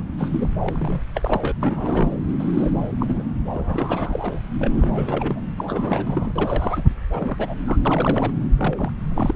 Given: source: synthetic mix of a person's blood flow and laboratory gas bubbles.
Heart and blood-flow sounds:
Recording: Doppler ultrasound of blood flow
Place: subclavian vein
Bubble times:
0.00-0.02 s: bubbles
0.18-0.48 s: bubbles
0.60-1.01 s: bubbles
1.14-1.52 s: bubbles
1.60-2.12 s: bubbles
2.40-2.72 s: bubbles
2.83-2.89 s: bubbles
2.99-3.23 s: bubbles
3.53-4.42 s: bubbles
4.58-5.45 s: bubbles
5.58-5.65 s: bubbles
5.67-6.32 s: bubbles
6.36-6.95 s: bubbles
7.12-7.54 s: bubbles
7.66-7.77 s: bubbles
7.85-8.35 s: bubbles
8.57-8.91 s: bubbles
9.10-9.36 s: bubbles
From the record:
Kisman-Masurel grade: 342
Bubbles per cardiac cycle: rolling drumbeat, 9 or more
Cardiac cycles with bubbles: 100%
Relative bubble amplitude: moderate (0.250 to 0.450)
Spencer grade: 3 (all of the cardiac periods contain showers or single bubble signals, but not dominating or overriding the cardiac motion signals)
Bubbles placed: anywhere in the cardiac cycle

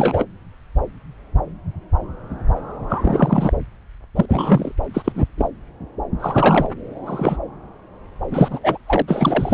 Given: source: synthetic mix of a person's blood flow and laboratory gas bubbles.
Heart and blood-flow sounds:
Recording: Doppler ultrasound of blood flow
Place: subclavian vein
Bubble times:
0.00-0.25 s: bubbles
2.89-3.53 s: bubbles
4.15-4.25 s: bubbles
4.28-4.71 s: bubbles
4.93-5.12 s: bubbles
5.15-5.24 s: bubbles
5.37-5.48 s: bubbles
6.19-6.67 s: bubbles
7.06-7.37 s: bubbles
8.31-8.59 s: bubbles
8.63-8.78 s: bubbles
8.86-9.02 s: bubbles
9.07-9.53 s: bubbles
From the record:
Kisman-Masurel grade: 233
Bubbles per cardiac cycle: several, 3 to 8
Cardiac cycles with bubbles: 50 to 99%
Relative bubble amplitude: loud (0.450 to 0.775)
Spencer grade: 3 (all of the cardiac periods contain showers or single bubble signals, but not dominating or overriding the cardiac motion signals)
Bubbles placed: anywhere in the cardiac cycle

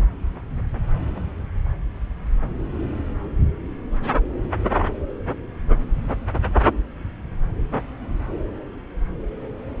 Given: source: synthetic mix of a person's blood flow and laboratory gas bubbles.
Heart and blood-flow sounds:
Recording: Doppler ultrasound of blood flow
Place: subclavian vein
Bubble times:
no bubbles
From the record:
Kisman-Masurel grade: 000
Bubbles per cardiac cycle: 0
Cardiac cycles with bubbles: 0%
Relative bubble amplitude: no bubbles discernible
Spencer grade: 0 (complete lack of bubble signals)

